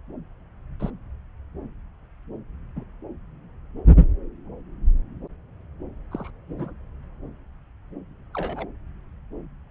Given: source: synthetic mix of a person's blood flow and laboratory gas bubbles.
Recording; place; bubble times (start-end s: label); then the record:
Doppler ultrasound of blood flow; subclavian vein
0.79-0.90 s: bubbles
2.75-2.83 s: bubbles
6.11-6.30 s: bubbles
6.49-6.73 s: bubbles
8.34-8.67 s: bubbles
From the record:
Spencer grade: 2 (many but less than half of the cardiac periods contain bubble signals, singularly or in groups); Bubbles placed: anywhere in the cardiac cycle